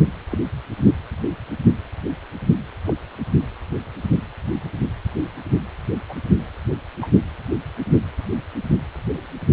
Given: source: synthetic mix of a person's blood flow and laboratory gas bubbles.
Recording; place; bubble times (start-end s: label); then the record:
Doppler ultrasound of blood flow; precordium
0.31-0.38 s: bubbles
2.85-2.94 s: bubbles
6.09-6.17 s: bubbles
7.00-7.11 s: bubbles
From the record:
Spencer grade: 2 (many but less than half of the cardiac periods contain bubble signals, singularly or in groups); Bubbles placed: anywhere in the cardiac cycle